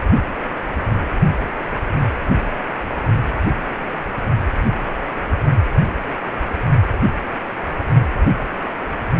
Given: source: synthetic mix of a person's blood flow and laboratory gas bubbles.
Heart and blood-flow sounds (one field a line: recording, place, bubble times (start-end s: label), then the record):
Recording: Doppler ultrasound of blood flow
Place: precordium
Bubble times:
0.85-0.93 s: bubbles
From the record:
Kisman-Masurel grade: 111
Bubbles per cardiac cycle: 1 to 2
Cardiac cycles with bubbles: 1 to 10%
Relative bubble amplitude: barely perceptible (0.100 to 0.250)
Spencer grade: 1 (occasional bubble signal discernible with the cardiac motion signal, with majority of cardiac periods free of bubbles)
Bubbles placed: anywhere in the cardiac cycle